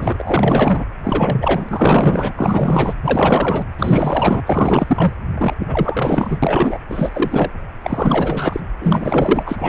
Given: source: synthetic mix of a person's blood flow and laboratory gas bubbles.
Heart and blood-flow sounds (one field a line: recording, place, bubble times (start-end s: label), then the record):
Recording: Doppler ultrasound of blood flow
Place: precordium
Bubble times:
0.00-0.86 s: bubbles
0.99-2.33 s: bubbles
2.36-2.96 s: bubbles
3.02-3.63 s: bubbles
3.78-4.42 s: bubbles
4.46-5.12 s: bubbles
5.38-5.53 s: bubbles
5.60-6.39 s: bubbles
6.42-6.78 s: bubbles
6.89-7.50 s: bubbles
7.81-8.60 s: bubbles
8.80-9.43 s: bubbles
9.46-9.69 s: bubbles
From the record:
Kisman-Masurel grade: 444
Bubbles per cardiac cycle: continuous sound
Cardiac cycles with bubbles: 100%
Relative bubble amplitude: maximal (0.775 to 0.999)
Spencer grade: 4 (maximum detectable bubble signal sounding continuously throughout systole and diastole of every cardiac period, and overriding the amplitude of the normal cardiac signals)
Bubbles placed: anywhere in the cardiac cycle